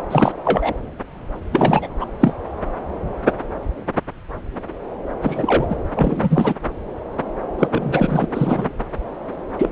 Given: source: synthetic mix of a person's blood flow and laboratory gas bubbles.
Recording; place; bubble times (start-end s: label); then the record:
Doppler ultrasound of blood flow; subclavian vein
0.10-0.32 s: bubbles
0.44-0.74 s: bubbles
1.52-1.89 s: bubbles
2.00-2.06 s: bubbles
2.20-2.36 s: bubbles
5.21-5.75 s: bubbles
5.95-6.54 s: bubbles
7.58-7.67 s: bubbles
7.72-8.26 s: bubbles
8.34-8.70 s: bubbles
9.57-9.69 s: bubbles
From the record:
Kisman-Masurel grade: 232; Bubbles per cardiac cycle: several, 3 to 8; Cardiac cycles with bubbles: 50 to 99%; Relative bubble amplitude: moderate (0.250 to 0.450); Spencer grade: 3 (all of the cardiac periods contain showers or single bubble signals, but not dominating or overriding the cardiac motion signals); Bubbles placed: anywhere in the cardiac cycle